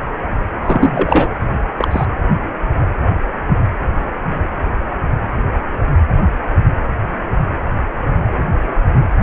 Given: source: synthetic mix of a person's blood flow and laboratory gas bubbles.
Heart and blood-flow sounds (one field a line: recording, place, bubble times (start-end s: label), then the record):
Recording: Doppler ultrasound of blood flow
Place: precordium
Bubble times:
0.60-1.30 s: bubbles
1.79-1.88 s: bubbles
1.91-2.06 s: bubbles
From the record:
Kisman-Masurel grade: 213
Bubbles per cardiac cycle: several, 3 to 8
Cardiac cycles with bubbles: 1 to 10%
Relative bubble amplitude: loud (0.450 to 0.775)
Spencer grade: 1 (occasional bubble signal discernible with the cardiac motion signal, with majority of cardiac periods free of bubbles)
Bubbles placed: anywhere in the cardiac cycle